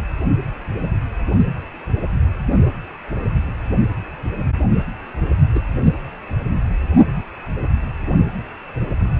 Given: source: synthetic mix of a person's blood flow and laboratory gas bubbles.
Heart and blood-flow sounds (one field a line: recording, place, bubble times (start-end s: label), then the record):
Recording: Doppler ultrasound of blood flow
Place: precordium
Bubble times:
5.54-5.60 s: bubbles
5.84-5.92 s: bubbles
From the record:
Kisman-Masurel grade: 123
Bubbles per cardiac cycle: 1 to 2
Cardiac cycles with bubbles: 10 to 50%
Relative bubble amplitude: loud (0.450 to 0.775)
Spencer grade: 2 (many but less than half of the cardiac periods contain bubble signals, singularly or in groups)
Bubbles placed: only in the low amplitude regions of the cardiac cycle